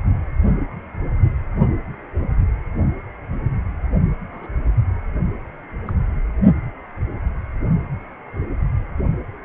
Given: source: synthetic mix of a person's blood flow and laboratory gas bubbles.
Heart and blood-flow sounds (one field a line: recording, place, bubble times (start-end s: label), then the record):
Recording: Doppler ultrasound of blood flow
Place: precordium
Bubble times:
4.31-4.48 s: bubbles
5.87-5.93 s: bubbles
From the record:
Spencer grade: 2 (many but less than half of the cardiac periods contain bubble signals, singularly or in groups)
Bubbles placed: only in the low amplitude regions of the cardiac cycle